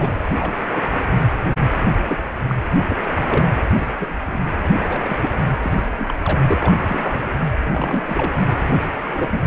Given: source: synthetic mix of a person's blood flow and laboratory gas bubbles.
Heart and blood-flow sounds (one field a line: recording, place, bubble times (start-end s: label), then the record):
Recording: Doppler ultrasound of blood flow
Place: precordium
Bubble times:
0.00-0.26 s: bubbles
0.31-0.54 s: bubbles
0.63-1.06 s: bubbles
2.07-2.22 s: bubbles
2.48-2.55 s: bubbles
2.90-2.96 s: bubbles
3.13-3.49 s: bubbles
3.78-3.87 s: bubbles
4.00-4.16 s: bubbles
4.26-4.40 s: bubbles
4.63-4.68 s: bubbles
4.73-5.17 s: bubbles
5.22-5.29 s: bubbles
5.38-5.45 s: bubbles
5.62-5.90 s: bubbles
5.96-6.14 s: bubbles
6.22-6.41 s: bubbles
6.49-6.73 s: bubbles
6.88-7.29 s: bubbles
7.64-8.31 s: bubbles
8.67-8.79 s: bubbles
9.04-9.40 s: bubbles
From the record:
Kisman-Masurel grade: 242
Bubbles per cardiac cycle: several, 3 to 8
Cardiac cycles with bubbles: 100%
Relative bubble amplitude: moderate (0.250 to 0.450)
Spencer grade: 3 (all of the cardiac periods contain showers or single bubble signals, but not dominating or overriding the cardiac motion signals)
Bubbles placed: anywhere in the cardiac cycle